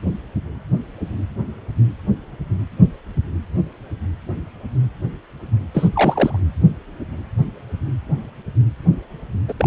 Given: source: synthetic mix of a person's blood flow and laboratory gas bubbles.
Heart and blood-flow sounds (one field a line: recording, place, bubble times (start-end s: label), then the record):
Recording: Doppler ultrasound of blood flow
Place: precordium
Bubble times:
5.74-5.88 s: bubbles
5.92-6.39 s: bubbles
9.48-9.54 s: bubbles
9.58-9.67 s: bubbles
From the record:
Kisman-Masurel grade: 212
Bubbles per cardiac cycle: several, 3 to 8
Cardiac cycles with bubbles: 1 to 10%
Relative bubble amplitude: moderate (0.250 to 0.450)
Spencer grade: 1 (occasional bubble signal discernible with the cardiac motion signal, with majority of cardiac periods free of bubbles)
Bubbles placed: anywhere in the cardiac cycle